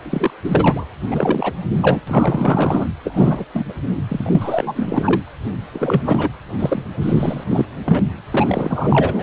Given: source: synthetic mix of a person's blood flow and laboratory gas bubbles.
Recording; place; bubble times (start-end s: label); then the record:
Doppler ultrasound of blood flow; precordium
0.02-0.34 s: bubbles
0.44-0.86 s: bubbles
1.10-1.54 s: bubbles
1.82-2.01 s: bubbles
2.07-2.87 s: bubbles
3.04-3.45 s: bubbles
3.53-3.74 s: bubbles
4.08-5.21 s: bubbles
5.74-6.29 s: bubbles
6.59-6.85 s: bubbles
7.02-7.44 s: bubbles
7.50-7.66 s: bubbles
7.85-8.00 s: bubbles
8.33-9.23 s: bubbles
From the record:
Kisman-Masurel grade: 342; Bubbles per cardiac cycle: rolling drumbeat, 9 or more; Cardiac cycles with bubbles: 100%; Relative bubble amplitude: moderate (0.250 to 0.450); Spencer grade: 3 (all of the cardiac periods contain showers or single bubble signals, but not dominating or overriding the cardiac motion signals); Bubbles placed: anywhere in the cardiac cycle